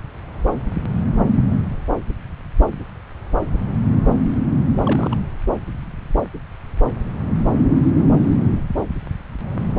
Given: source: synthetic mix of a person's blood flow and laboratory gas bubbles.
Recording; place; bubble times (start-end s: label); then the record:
Doppler ultrasound of blood flow; subclavian vein
4.86-5.16 s: bubbles
From the record:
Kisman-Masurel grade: 211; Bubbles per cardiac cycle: several, 3 to 8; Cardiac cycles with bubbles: 1 to 10%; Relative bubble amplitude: barely perceptible (0.100 to 0.250); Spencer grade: 1 (occasional bubble signal discernible with the cardiac motion signal, with majority of cardiac periods free of bubbles); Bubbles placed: anywhere in the cardiac cycle